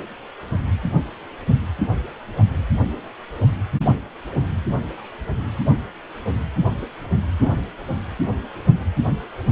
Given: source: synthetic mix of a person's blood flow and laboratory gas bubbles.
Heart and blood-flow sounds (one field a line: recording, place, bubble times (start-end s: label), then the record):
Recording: Doppler ultrasound of blood flow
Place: precordium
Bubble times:
3.86-3.94 s: bubbles
7.42-7.58 s: bubbles
From the record:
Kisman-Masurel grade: 121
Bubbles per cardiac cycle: 1 to 2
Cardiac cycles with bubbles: 10 to 50%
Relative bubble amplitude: barely perceptible (0.100 to 0.250)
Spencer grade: 2 (many but less than half of the cardiac periods contain bubble signals, singularly or in groups)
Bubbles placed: only in the low amplitude regions of the cardiac cycle